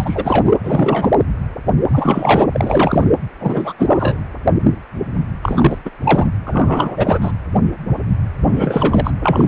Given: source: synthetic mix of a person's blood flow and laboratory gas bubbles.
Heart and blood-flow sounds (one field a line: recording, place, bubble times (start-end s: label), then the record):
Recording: Doppler ultrasound of blood flow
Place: precordium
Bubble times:
0.00-0.53 s: bubbles
0.63-1.12 s: bubbles
1.88-2.46 s: bubbles
2.52-3.12 s: bubbles
3.40-3.73 s: bubbles
3.79-4.17 s: bubbles
5.42-5.78 s: bubbles
5.85-5.91 s: bubbles
6.04-6.30 s: bubbles
6.45-7.19 s: bubbles
7.21-7.32 s: bubbles
8.41-9.11 s: bubbles
9.22-9.48 s: bubbles
From the record:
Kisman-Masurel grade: 333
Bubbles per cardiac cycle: rolling drumbeat, 9 or more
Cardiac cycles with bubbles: 50 to 99%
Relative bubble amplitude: loud (0.450 to 0.775)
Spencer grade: 3 (all of the cardiac periods contain showers or single bubble signals, but not dominating or overriding the cardiac motion signals)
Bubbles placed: anywhere in the cardiac cycle